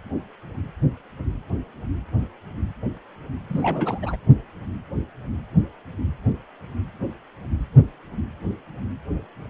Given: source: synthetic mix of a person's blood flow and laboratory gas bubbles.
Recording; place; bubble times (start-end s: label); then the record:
Doppler ultrasound of blood flow; precordium
3.49-3.99 s: bubbles
4.02-4.16 s: bubbles
From the record:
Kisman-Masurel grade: 211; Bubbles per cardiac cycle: several, 3 to 8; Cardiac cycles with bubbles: 1 to 10%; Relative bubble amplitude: barely perceptible (0.100 to 0.250); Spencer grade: 1 (occasional bubble signal discernible with the cardiac motion signal, with majority of cardiac periods free of bubbles); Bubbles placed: only in the low amplitude regions of the cardiac cycle